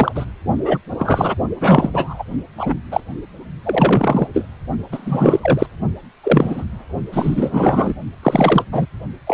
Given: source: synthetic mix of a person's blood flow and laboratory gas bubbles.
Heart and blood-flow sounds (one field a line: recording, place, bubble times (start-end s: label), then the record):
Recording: Doppler ultrasound of blood flow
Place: precordium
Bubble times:
0.00-0.12 s: bubbles
0.14-0.25 s: bubbles
0.65-0.78 s: bubbles
0.99-1.34 s: bubbles
1.61-2.23 s: bubbles
2.57-2.74 s: bubbles
2.91-3.00 s: bubbles
3.64-4.28 s: bubbles
4.33-4.44 s: bubbles
4.92-5.67 s: bubbles
6.23-6.64 s: bubbles
7.12-7.94 s: bubbles
8.23-8.65 s: bubbles
8.72-8.87 s: bubbles
9.27-9.34 s: bubbles
From the record:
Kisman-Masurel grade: 233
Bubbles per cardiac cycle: several, 3 to 8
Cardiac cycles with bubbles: 50 to 99%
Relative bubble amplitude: loud (0.450 to 0.775)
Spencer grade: 3 (all of the cardiac periods contain showers or single bubble signals, but not dominating or overriding the cardiac motion signals)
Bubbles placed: only in the low amplitude regions of the cardiac cycle